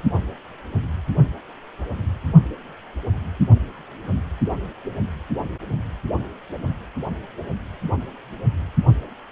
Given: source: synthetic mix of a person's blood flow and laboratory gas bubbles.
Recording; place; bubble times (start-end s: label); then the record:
Doppler ultrasound of blood flow; precordium
no bubbles
From the record:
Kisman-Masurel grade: 000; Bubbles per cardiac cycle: 0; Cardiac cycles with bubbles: 0%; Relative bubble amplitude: no bubbles discernible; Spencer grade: 0 (complete lack of bubble signals)